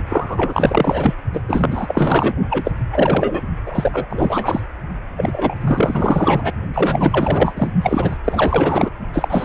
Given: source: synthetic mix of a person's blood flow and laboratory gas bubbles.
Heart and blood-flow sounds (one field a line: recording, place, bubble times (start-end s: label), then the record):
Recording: Doppler ultrasound of blood flow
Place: precordium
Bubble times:
0.09-1.16 s: bubbles
1.33-1.41 s: bubbles
1.48-2.35 s: bubbles
2.50-2.72 s: bubbles
2.90-3.41 s: bubbles
3.66-4.06 s: bubbles
4.09-4.61 s: bubbles
5.17-5.54 s: bubbles
5.61-6.52 s: bubbles
6.74-7.72 s: bubbles
7.82-8.17 s: bubbles
8.24-8.90 s: bubbles
9.13-9.45 s: bubbles
From the record:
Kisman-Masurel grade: 444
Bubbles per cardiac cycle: continuous sound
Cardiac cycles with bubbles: 100%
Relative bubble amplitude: maximal (0.775 to 0.999)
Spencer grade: 4 (maximum detectable bubble signal sounding continuously throughout systole and diastole of every cardiac period, and overriding the amplitude of the normal cardiac signals)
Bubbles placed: only in the low amplitude regions of the cardiac cycle